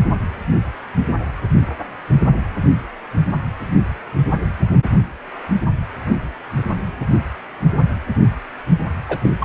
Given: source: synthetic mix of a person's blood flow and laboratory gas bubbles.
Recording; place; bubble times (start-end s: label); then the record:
Doppler ultrasound of blood flow; precordium
9.08-9.19 s: bubbles
9.22-9.29 s: bubbles
9.39-9.45 s: bubbles
From the record:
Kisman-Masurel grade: 222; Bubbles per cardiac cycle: several, 3 to 8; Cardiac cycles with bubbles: 10 to 50%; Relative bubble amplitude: moderate (0.250 to 0.450); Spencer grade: 2 (many but less than half of the cardiac periods contain bubble signals, singularly or in groups); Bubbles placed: only in the low amplitude regions of the cardiac cycle